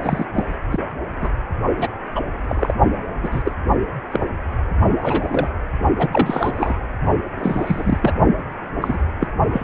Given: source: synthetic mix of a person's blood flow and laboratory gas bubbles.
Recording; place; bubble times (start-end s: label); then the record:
Doppler ultrasound of blood flow; precordium
0.02-0.26 s: bubbles
0.35-0.43 s: bubbles
0.71-0.79 s: bubbles
1.21-1.30 s: bubbles
1.78-1.88 s: bubbles
2.15-2.20 s: bubbles
2.49-2.73 s: bubbles
3.22-3.52 s: bubbles
4.11-4.20 s: bubbles
4.90-4.96 s: bubbles
5.01-5.48 s: bubbles
5.98-6.08 s: bubbles
6.11-6.78 s: bubbles
7.37-8.13 s: bubbles
8.81-8.99 s: bubbles
9.20-9.27 s: bubbles
9.53-9.64 s: bubbles
From the record:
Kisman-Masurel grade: 242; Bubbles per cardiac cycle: several, 3 to 8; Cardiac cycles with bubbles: 100%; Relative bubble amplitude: moderate (0.250 to 0.450); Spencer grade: 3 (all of the cardiac periods contain showers or single bubble signals, but not dominating or overriding the cardiac motion signals); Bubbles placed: only in the low amplitude regions of the cardiac cycle